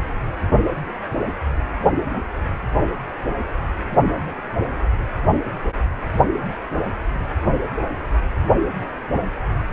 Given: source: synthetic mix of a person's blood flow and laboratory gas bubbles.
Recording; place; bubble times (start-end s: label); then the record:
Doppler ultrasound of blood flow; precordium
no bubbles
From the record:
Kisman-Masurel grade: 000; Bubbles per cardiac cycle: 0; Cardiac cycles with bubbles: 0%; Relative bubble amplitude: no bubbles discernible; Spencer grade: 0 (complete lack of bubble signals)